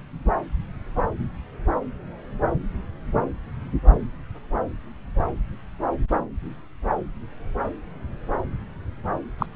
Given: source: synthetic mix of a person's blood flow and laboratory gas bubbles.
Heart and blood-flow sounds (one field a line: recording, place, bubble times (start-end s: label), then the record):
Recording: Doppler ultrasound of blood flow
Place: subclavian vein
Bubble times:
9.38-9.46 s: bubbles
From the record:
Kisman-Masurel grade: 112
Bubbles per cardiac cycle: 1 to 2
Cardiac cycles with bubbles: 1 to 10%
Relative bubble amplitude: moderate (0.250 to 0.450)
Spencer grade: 1 (occasional bubble signal discernible with the cardiac motion signal, with majority of cardiac periods free of bubbles)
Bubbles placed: anywhere in the cardiac cycle